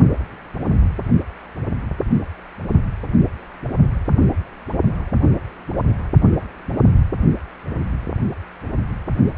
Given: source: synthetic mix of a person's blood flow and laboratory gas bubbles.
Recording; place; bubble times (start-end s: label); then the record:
Doppler ultrasound of blood flow; precordium
no bubbles
From the record:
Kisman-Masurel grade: 000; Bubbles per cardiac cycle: 0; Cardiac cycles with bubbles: 0%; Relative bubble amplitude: no bubbles discernible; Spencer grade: 0 (complete lack of bubble signals)